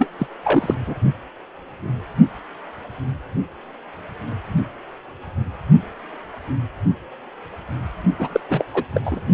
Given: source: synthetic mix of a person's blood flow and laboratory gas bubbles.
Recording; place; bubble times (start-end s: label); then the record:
Doppler ultrasound of blood flow; precordium
0.00-0.10 s: bubbles
0.19-0.27 s: bubbles
0.44-0.74 s: bubbles
0.86-0.94 s: bubbles
8.18-8.41 s: bubbles
8.49-8.64 s: bubbles
8.74-8.84 s: bubbles
8.94-9.02 s: bubbles
9.05-9.21 s: bubbles
From the record:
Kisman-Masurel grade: 222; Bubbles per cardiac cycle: several, 3 to 8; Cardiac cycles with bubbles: 10 to 50%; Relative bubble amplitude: moderate (0.250 to 0.450); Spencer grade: 2 (many but less than half of the cardiac periods contain bubble signals, singularly or in groups); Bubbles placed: only in the low amplitude regions of the cardiac cycle